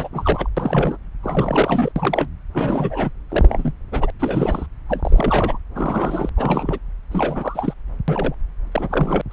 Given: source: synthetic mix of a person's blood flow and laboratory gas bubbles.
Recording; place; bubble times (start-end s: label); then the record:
Doppler ultrasound of blood flow; subclavian vein
0.00-0.09 s: bubbles
0.12-0.50 s: bubbles
0.56-0.97 s: bubbles
1.23-1.92 s: bubbles
1.95-2.29 s: bubbles
2.53-3.10 s: bubbles
3.29-3.73 s: bubbles
3.91-4.11 s: bubbles
4.19-4.66 s: bubbles
4.89-5.58 s: bubbles
5.75-6.29 s: bubbles
6.37-6.79 s: bubbles
7.11-7.73 s: bubbles
8.08-8.35 s: bubbles
8.71-9.21 s: bubbles
9.30-9.33 s: bubbles
From the record:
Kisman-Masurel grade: 342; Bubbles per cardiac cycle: rolling drumbeat, 9 or more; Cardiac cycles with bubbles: 100%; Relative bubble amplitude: moderate (0.250 to 0.450); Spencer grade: 3 (all of the cardiac periods contain showers or single bubble signals, but not dominating or overriding the cardiac motion signals); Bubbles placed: anywhere in the cardiac cycle